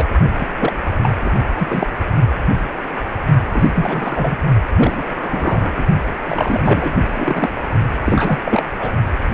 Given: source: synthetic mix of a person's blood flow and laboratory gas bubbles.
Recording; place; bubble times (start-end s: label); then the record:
Doppler ultrasound of blood flow; precordium
0.00-0.05 s: bubbles
0.38-0.47 s: bubbles
0.59-0.72 s: bubbles
1.03-1.12 s: bubbles
1.21-1.31 s: bubbles
1.58-1.87 s: bubbles
3.53-3.70 s: bubbles
3.75-4.36 s: bubbles
4.68-5.74 s: bubbles
5.76-5.85 s: bubbles
6.25-6.94 s: bubbles
7.15-7.49 s: bubbles
8.05-8.62 s: bubbles
8.79-8.91 s: bubbles
From the record:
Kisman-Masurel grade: 333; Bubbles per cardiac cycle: rolling drumbeat, 9 or more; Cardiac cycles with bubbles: 50 to 99%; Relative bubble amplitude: loud (0.450 to 0.775); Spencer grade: 3 (all of the cardiac periods contain showers or single bubble signals, but not dominating or overriding the cardiac motion signals); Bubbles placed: only in the low amplitude regions of the cardiac cycle